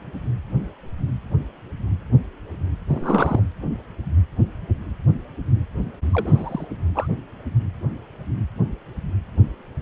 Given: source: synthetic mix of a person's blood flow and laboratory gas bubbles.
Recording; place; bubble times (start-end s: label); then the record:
Doppler ultrasound of blood flow; precordium
2.89-3.43 s: bubbles
6.13-6.65 s: bubbles
6.95-7.07 s: bubbles
From the record:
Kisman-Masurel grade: 221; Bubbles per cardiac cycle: several, 3 to 8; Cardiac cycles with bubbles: 10 to 50%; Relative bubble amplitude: barely perceptible (0.100 to 0.250); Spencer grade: 2 (many but less than half of the cardiac periods contain bubble signals, singularly or in groups); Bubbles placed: anywhere in the cardiac cycle